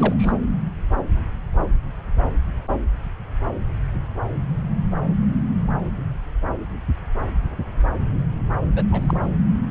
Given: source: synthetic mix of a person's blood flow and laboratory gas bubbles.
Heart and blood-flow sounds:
Doppler ultrasound of blood flow; subclavian vein
0.00-0.33 s: bubbles
8.76-8.84 s: bubbles
8.92-9.17 s: bubbles
9.22-9.28 s: bubbles
From the record:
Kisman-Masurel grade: 221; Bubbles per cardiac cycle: several, 3 to 8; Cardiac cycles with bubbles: 10 to 50%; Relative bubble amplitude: barely perceptible (0.100 to 0.250); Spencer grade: 2 (many but less than half of the cardiac periods contain bubble signals, singularly or in groups); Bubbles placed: anywhere in the cardiac cycle

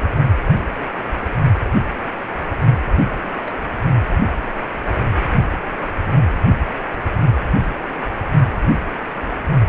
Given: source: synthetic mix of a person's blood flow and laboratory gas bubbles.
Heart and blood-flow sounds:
Doppler ultrasound of blood flow; precordium
3.04-3.09 s: bubbles
3.12-3.29 s: bubbles
3.44-3.53 s: bubbles
3.58-3.61 s: bubbles
From the record:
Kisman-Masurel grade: 211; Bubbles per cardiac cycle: several, 3 to 8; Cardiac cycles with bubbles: 1 to 10%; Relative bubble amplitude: barely perceptible (0.100 to 0.250); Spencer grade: 1 (occasional bubble signal discernible with the cardiac motion signal, with majority of cardiac periods free of bubbles); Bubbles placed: anywhere in the cardiac cycle

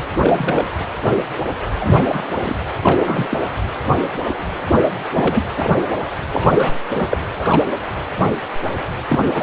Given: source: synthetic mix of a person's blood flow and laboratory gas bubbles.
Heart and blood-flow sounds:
Doppler ultrasound of blood flow; precordium
0.22-0.65 s: bubbles
1.81-2.24 s: bubbles
2.42-2.56 s: bubbles
2.82-3.38 s: bubbles
5.14-5.45 s: bubbles
5.56-5.77 s: bubbles
6.32-6.72 s: bubbles
6.94-7.08 s: bubbles
7.11-7.17 s: bubbles
7.40-7.65 s: bubbles
9.09-9.31 s: bubbles
9.34-9.43 s: bubbles
From the record:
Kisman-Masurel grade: 232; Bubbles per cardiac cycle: several, 3 to 8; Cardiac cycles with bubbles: 50 to 99%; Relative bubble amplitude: moderate (0.250 to 0.450); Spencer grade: 3 (all of the cardiac periods contain showers or single bubble signals, but not dominating or overriding the cardiac motion signals); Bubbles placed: anywhere in the cardiac cycle

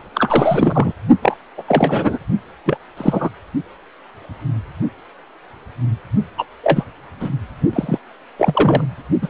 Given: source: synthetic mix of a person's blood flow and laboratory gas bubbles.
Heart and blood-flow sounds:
Doppler ultrasound of blood flow; precordium
0.14-0.93 s: bubbles
1.22-1.37 s: bubbles
1.57-1.63 s: bubbles
1.67-2.19 s: bubbles
2.66-2.77 s: bubbles
2.97-3.29 s: bubbles
6.38-6.44 s: bubbles
6.63-6.84 s: bubbles
7.20-7.29 s: bubbles
7.73-7.98 s: bubbles
8.38-8.88 s: bubbles
9.22-9.28 s: bubbles
From the record:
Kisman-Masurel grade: 233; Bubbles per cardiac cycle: several, 3 to 8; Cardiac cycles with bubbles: 50 to 99%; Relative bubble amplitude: loud (0.450 to 0.775); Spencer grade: 3 (all of the cardiac periods contain showers or single bubble signals, but not dominating or overriding the cardiac motion signals); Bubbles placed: only in the low amplitude regions of the cardiac cycle

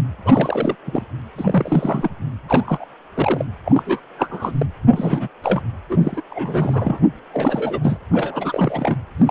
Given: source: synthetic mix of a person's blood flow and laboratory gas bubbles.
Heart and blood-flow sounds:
Doppler ultrasound of blood flow; precordium
0.25-0.75 s: bubbles
0.85-1.01 s: bubbles
1.37-2.09 s: bubbles
2.48-2.85 s: bubbles
3.14-3.45 s: bubbles
3.65-4.00 s: bubbles
4.17-4.66 s: bubbles
4.88-5.28 s: bubbles
5.42-5.64 s: bubbles
5.89-6.22 s: bubbles
6.30-6.98 s: bubbles
7.33-7.79 s: bubbles
7.81-7.97 s: bubbles
8.11-8.97 s: bubbles
9.17-9.31 s: bubbles
From the record:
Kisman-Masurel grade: 342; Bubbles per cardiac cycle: rolling drumbeat, 9 or more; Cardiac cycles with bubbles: 100%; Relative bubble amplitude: moderate (0.250 to 0.450); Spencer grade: 3 (all of the cardiac periods contain showers or single bubble signals, but not dominating or overriding the cardiac motion signals); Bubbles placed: anywhere in the cardiac cycle

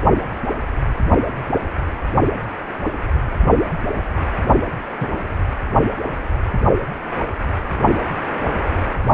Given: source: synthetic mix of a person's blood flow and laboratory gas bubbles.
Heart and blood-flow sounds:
Doppler ultrasound of blood flow; precordium
5.00-5.08 s: bubbles
From the record:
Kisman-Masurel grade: 123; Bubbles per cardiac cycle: 1 to 2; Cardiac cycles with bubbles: 10 to 50%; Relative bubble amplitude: loud (0.450 to 0.775); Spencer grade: 2 (many but less than half of the cardiac periods contain bubble signals, singularly or in groups); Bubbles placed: only in the low amplitude regions of the cardiac cycle

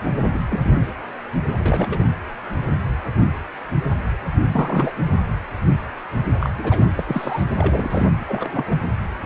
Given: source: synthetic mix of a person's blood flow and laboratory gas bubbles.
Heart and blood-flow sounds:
Doppler ultrasound of blood flow; precordium
0.33-0.39 s: bubbles
0.49-0.87 s: bubbles
1.58-2.06 s: bubbles
4.52-4.92 s: bubbles
6.40-6.50 s: bubbles
6.58-6.85 s: bubbles
6.96-7.42 s: bubbles
7.58-8.07 s: bubbles
8.28-8.77 s: bubbles
From the record:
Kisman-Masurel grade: 232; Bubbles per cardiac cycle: several, 3 to 8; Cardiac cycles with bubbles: 50 to 99%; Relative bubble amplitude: moderate (0.250 to 0.450); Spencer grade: 3 (all of the cardiac periods contain showers or single bubble signals, but not dominating or overriding the cardiac motion signals); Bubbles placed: anywhere in the cardiac cycle

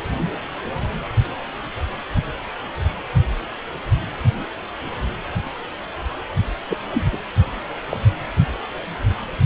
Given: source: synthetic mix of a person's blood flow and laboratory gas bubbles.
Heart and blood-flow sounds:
Doppler ultrasound of blood flow; precordium
6.69-6.77 s: bubbles
6.89-7.03 s: bubbles
7.12-7.18 s: bubbles
7.89-7.97 s: bubbles
From the record:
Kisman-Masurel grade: 212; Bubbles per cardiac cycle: several, 3 to 8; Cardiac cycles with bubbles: 1 to 10%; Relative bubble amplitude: moderate (0.250 to 0.450); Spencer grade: 1 (occasional bubble signal discernible with the cardiac motion signal, with majority of cardiac periods free of bubbles); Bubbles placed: anywhere in the cardiac cycle

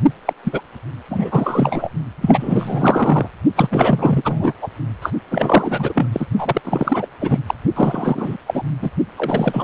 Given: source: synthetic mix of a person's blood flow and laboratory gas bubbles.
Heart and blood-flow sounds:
Doppler ultrasound of blood flow; precordium
0.25-0.33 s: bubbles
0.44-0.61 s: bubbles
1.10-1.91 s: bubbles
2.21-3.29 s: bubbles
3.55-4.54 s: bubbles
4.62-4.68 s: bubbles
5.01-5.10 s: bubbles
5.30-6.08 s: bubbles
6.12-6.26 s: bubbles
6.38-6.62 s: bubbles
6.64-7.08 s: bubbles
7.20-7.39 s: bubbles
7.46-7.54 s: bubbles
7.75-8.37 s: bubbles
8.46-8.63 s: bubbles
8.81-8.90 s: bubbles
9.18-9.64 s: bubbles
From the record:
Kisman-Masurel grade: 444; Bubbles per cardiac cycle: continuous sound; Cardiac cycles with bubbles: 100%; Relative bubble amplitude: maximal (0.775 to 0.999); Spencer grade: 4 (maximum detectable bubble signal sounding continuously throughout systole and diastole of every cardiac period, and overriding the amplitude of the normal cardiac signals); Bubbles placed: only in the low amplitude regions of the cardiac cycle

